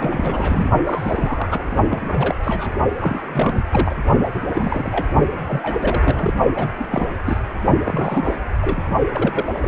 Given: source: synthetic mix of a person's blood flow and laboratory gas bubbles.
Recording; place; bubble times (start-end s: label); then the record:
Doppler ultrasound of blood flow; precordium
0.00-0.70 s: bubbles
0.85-1.77 s: bubbles
1.88-2.35 s: bubbles
2.44-2.72 s: bubbles
2.98-3.22 s: bubbles
3.33-3.62 s: bubbles
3.71-3.96 s: bubbles
4.33-4.39 s: bubbles
4.54-5.07 s: bubbles
5.47-6.33 s: bubbles
6.55-6.68 s: bubbles
6.76-6.87 s: bubbles
6.90-7.07 s: bubbles
7.25-7.38 s: bubbles
7.84-8.36 s: bubbles
8.62-8.82 s: bubbles
9.13-9.45 s: bubbles
9.53-9.68 s: bubbles
From the record:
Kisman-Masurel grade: 342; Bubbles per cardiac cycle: rolling drumbeat, 9 or more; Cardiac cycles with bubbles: 100%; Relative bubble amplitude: moderate (0.250 to 0.450); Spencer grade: 3 (all of the cardiac periods contain showers or single bubble signals, but not dominating or overriding the cardiac motion signals); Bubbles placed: only in the low amplitude regions of the cardiac cycle